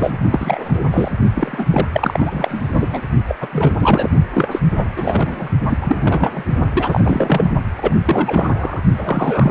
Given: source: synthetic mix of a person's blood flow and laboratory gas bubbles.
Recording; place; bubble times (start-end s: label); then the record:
Doppler ultrasound of blood flow; precordium
0.00-0.18 s: bubbles
0.32-1.15 s: bubbles
1.33-1.67 s: bubbles
1.70-1.88 s: bubbles
1.93-3.02 s: bubbles
3.28-3.35 s: bubbles
3.40-3.48 s: bubbles
3.53-3.72 s: bubbles
3.79-4.08 s: bubbles
4.34-4.49 s: bubbles
4.51-4.59 s: bubbles
4.78-4.87 s: bubbles
4.96-5.48 s: bubbles
5.70-6.44 s: bubbles
6.75-7.51 s: bubbles
7.77-7.96 s: bubbles
8.05-8.81 s: bubbles
8.96-9.51 s: bubbles
From the record:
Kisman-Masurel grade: 333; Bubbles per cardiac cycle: rolling drumbeat, 9 or more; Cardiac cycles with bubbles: 50 to 99%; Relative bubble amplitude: loud (0.450 to 0.775); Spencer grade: 3 (all of the cardiac periods contain showers or single bubble signals, but not dominating or overriding the cardiac motion signals); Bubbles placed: only in the low amplitude regions of the cardiac cycle